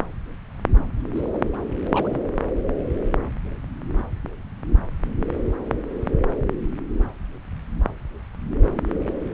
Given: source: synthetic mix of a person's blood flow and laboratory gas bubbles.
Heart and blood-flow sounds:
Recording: Doppler ultrasound of blood flow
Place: subclavian vein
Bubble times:
1.11-1.30 s: bubbles
1.33-1.38 s: bubbles
1.77-2.22 s: bubbles
From the record:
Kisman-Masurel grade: 211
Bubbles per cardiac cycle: several, 3 to 8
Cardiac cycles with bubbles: 1 to 10%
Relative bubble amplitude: barely perceptible (0.100 to 0.250)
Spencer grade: 1 (occasional bubble signal discernible with the cardiac motion signal, with majority of cardiac periods free of bubbles)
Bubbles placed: anywhere in the cardiac cycle

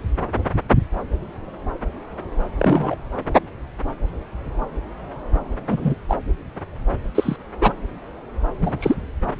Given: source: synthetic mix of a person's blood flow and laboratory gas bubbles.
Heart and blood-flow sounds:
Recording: Doppler ultrasound of blood flow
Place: subclavian vein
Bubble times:
2.57-2.96 s: bubbles
5.68-5.95 s: bubbles
6.08-6.17 s: bubbles
7.14-7.36 s: bubbles
7.60-7.73 s: bubbles
8.61-8.95 s: bubbles
From the record:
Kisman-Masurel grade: 122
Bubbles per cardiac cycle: 1 to 2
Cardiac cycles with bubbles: 10 to 50%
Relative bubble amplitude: moderate (0.250 to 0.450)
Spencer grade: 2 (many but less than half of the cardiac periods contain bubble signals, singularly or in groups)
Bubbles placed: anywhere in the cardiac cycle

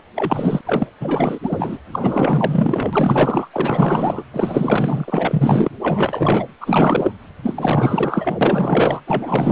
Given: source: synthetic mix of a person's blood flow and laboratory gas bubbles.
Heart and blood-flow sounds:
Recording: Doppler ultrasound of blood flow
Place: precordium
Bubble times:
0.15-0.61 s: bubbles
0.65-0.87 s: bubbles
1.00-1.39 s: bubbles
1.43-1.78 s: bubbles
1.92-3.48 s: bubbles
3.53-4.23 s: bubbles
4.33-5.70 s: bubbles
5.82-6.47 s: bubbles
6.61-7.11 s: bubbles
7.43-8.38 s: bubbles
8.41-9.01 s: bubbles
9.07-9.51 s: bubbles
From the record:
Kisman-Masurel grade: 444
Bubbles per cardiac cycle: continuous sound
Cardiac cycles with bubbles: 100%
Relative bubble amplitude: maximal (0.775 to 0.999)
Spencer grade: 4 (maximum detectable bubble signal sounding continuously throughout systole and diastole of every cardiac period, and overriding the amplitude of the normal cardiac signals)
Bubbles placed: anywhere in the cardiac cycle

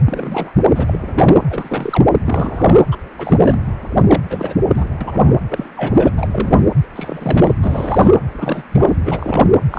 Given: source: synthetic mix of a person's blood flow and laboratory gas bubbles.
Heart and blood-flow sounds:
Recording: Doppler ultrasound of blood flow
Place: precordium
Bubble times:
0.06-0.52 s: bubbles
0.74-1.46 s: bubbles
1.49-2.04 s: bubbles
2.25-2.77 s: bubbles
2.91-2.98 s: bubbles
3.18-3.59 s: bubbles
4.07-4.22 s: bubbles
4.30-4.55 s: bubbles
4.74-4.90 s: bubbles
5.01-5.36 s: bubbles
5.50-5.70 s: bubbles
5.75-6.69 s: bubbles
6.95-7.56 s: bubbles
7.62-8.14 s: bubbles
8.32-8.62 s: bubbles
8.71-8.96 s: bubbles
9.03-9.54 s: bubbles
9.70-9.79 s: bubbles
From the record:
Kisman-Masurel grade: 342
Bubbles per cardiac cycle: rolling drumbeat, 9 or more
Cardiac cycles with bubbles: 100%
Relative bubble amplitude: moderate (0.250 to 0.450)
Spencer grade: 3 (all of the cardiac periods contain showers or single bubble signals, but not dominating or overriding the cardiac motion signals)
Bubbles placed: anywhere in the cardiac cycle

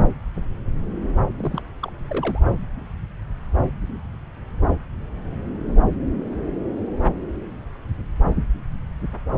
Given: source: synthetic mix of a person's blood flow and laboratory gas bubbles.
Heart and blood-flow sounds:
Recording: Doppler ultrasound of blood flow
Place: subclavian vein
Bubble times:
1.36-1.62 s: bubbles
1.81-1.92 s: bubbles
2.08-2.40 s: bubbles
From the record:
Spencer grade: 2 (many but less than half of the cardiac periods contain bubble signals, singularly or in groups)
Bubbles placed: anywhere in the cardiac cycle

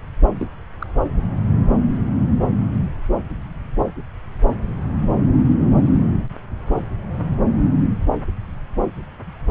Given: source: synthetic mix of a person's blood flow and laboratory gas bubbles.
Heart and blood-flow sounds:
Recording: Doppler ultrasound of blood flow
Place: subclavian vein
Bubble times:
0.39-0.47 s: bubbles
0.80-0.86 s: bubbles
From the record:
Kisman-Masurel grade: 111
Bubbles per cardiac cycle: 1 to 2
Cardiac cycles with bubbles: 1 to 10%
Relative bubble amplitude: barely perceptible (0.100 to 0.250)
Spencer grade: 1 (occasional bubble signal discernible with the cardiac motion signal, with majority of cardiac periods free of bubbles)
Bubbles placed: anywhere in the cardiac cycle

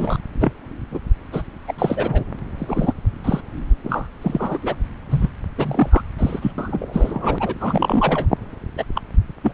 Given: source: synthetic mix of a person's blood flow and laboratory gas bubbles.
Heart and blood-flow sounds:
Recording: Doppler ultrasound of blood flow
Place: subclavian vein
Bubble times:
0.00-0.17 s: bubbles
0.40-0.52 s: bubbles
0.91-0.99 s: bubbles
1.32-1.42 s: bubbles
1.67-1.74 s: bubbles
1.78-2.23 s: bubbles
2.58-2.94 s: bubbles
3.24-3.40 s: bubbles
3.84-4.08 s: bubbles
4.21-4.58 s: bubbles
4.62-4.75 s: bubbles
5.10-5.31 s: bubbles
5.58-6.02 s: bubbles
6.18-6.39 s: bubbles
6.42-6.52 s: bubbles
6.58-7.54 s: bubbles
7.60-8.27 s: bubbles
8.78-8.84 s: bubbles
8.95-9.01 s: bubbles
9.43-9.53 s: bubbles
From the record:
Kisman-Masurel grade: 242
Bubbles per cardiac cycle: several, 3 to 8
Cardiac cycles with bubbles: 100%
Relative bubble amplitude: moderate (0.250 to 0.450)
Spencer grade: 3 (all of the cardiac periods contain showers or single bubble signals, but not dominating or overriding the cardiac motion signals)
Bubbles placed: anywhere in the cardiac cycle

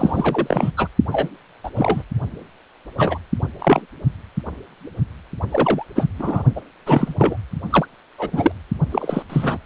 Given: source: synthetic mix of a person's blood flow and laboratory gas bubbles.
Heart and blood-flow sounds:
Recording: Doppler ultrasound of blood flow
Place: precordium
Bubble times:
0.00-0.71 s: bubbles
0.77-0.89 s: bubbles
1.11-1.30 s: bubbles
1.64-1.70 s: bubbles
1.75-2.03 s: bubbles
2.98-3.18 s: bubbles
3.59-3.82 s: bubbles
5.51-5.85 s: bubbles
5.95-6.07 s: bubbles
6.19-6.42 s: bubbles
6.56-6.61 s: bubbles
6.86-7.14 s: bubbles
7.18-7.37 s: bubbles
7.70-7.86 s: bubbles
8.18-8.52 s: bubbles
8.91-9.22 s: bubbles
9.29-9.58 s: bubbles
From the record:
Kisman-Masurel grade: 233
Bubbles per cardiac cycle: several, 3 to 8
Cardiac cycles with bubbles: 50 to 99%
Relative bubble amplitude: loud (0.450 to 0.775)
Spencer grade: 3 (all of the cardiac periods contain showers or single bubble signals, but not dominating or overriding the cardiac motion signals)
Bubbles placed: only in the low amplitude regions of the cardiac cycle

